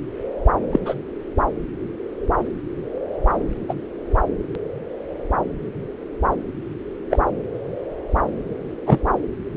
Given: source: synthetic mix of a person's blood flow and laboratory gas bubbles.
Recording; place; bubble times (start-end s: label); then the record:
Doppler ultrasound of blood flow; subclavian vein
0.72-0.79 s: bubbles
0.85-0.95 s: bubbles
3.68-3.74 s: bubbles
7.11-7.19 s: bubbles
8.86-8.99 s: bubbles
From the record:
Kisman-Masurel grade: 123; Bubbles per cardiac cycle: 1 to 2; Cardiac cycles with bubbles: 10 to 50%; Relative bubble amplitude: loud (0.450 to 0.775); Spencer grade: 2 (many but less than half of the cardiac periods contain bubble signals, singularly or in groups); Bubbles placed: anywhere in the cardiac cycle